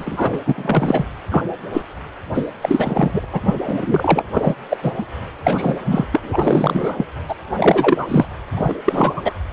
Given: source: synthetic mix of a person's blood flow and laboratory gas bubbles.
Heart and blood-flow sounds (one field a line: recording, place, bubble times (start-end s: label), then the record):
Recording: Doppler ultrasound of blood flow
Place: precordium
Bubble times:
0.00-0.39 s: bubbles
0.47-1.06 s: bubbles
1.31-1.44 s: bubbles
1.73-1.82 s: bubbles
2.34-2.52 s: bubbles
2.61-3.26 s: bubbles
3.33-3.41 s: bubbles
3.45-4.24 s: bubbles
4.34-4.56 s: bubbles
4.70-4.77 s: bubbles
4.82-4.92 s: bubbles
4.98-5.05 s: bubbles
5.43-5.80 s: bubbles
5.85-6.06 s: bubbles
6.12-7.05 s: bubbles
7.29-7.35 s: bubbles
7.58-8.25 s: bubbles
8.55-8.75 s: bubbles
8.84-9.32 s: bubbles
From the record:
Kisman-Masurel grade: 343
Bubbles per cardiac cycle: rolling drumbeat, 9 or more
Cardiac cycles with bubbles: 100%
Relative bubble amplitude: loud (0.450 to 0.775)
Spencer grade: 3 (all of the cardiac periods contain showers or single bubble signals, but not dominating or overriding the cardiac motion signals)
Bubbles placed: anywhere in the cardiac cycle